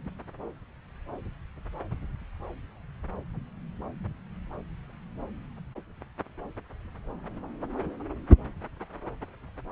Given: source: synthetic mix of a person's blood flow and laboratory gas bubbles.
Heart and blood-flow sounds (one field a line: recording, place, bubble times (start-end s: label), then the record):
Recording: Doppler ultrasound of blood flow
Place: subclavian vein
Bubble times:
no bubbles
From the record:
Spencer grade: 0 (complete lack of bubble signals)